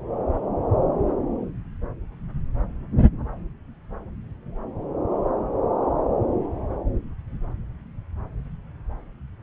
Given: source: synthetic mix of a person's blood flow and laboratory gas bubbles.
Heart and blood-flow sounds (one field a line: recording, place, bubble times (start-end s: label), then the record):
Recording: Doppler ultrasound of blood flow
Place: subclavian vein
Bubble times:
no bubbles
From the record:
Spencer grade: 0 (complete lack of bubble signals)